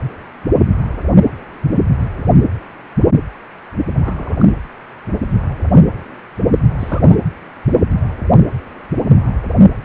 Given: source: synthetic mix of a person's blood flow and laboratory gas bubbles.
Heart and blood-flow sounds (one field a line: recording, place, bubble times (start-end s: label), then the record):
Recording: Doppler ultrasound of blood flow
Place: precordium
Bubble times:
4.03-4.46 s: bubbles
6.79-7.17 s: bubbles
From the record:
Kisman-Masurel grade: 211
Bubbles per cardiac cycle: several, 3 to 8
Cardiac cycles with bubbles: 1 to 10%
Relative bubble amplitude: barely perceptible (0.100 to 0.250)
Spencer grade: 1 (occasional bubble signal discernible with the cardiac motion signal, with majority of cardiac periods free of bubbles)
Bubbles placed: anywhere in the cardiac cycle